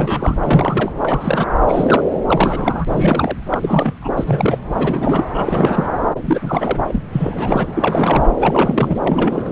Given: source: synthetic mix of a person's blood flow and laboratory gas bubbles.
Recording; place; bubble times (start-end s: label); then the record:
Doppler ultrasound of blood flow; subclavian vein
0.00-0.35 s: bubbles
0.41-0.92 s: bubbles
1.02-1.46 s: bubbles
1.67-2.02 s: bubbles
2.28-2.85 s: bubbles
2.91-3.38 s: bubbles
3.50-3.94 s: bubbles
4.01-4.10 s: bubbles
4.17-4.58 s: bubbles
4.73-5.24 s: bubbles
5.33-5.89 s: bubbles
6.21-6.83 s: bubbles
6.88-7.00 s: bubbles
7.12-7.71 s: bubbles
7.74-8.26 s: bubbles
8.39-9.01 s: bubbles
9.05-9.52 s: bubbles
From the record:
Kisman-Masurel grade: 342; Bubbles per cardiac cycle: rolling drumbeat, 9 or more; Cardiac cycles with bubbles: 100%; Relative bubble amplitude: moderate (0.250 to 0.450); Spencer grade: 3 (all of the cardiac periods contain showers or single bubble signals, but not dominating or overriding the cardiac motion signals); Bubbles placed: anywhere in the cardiac cycle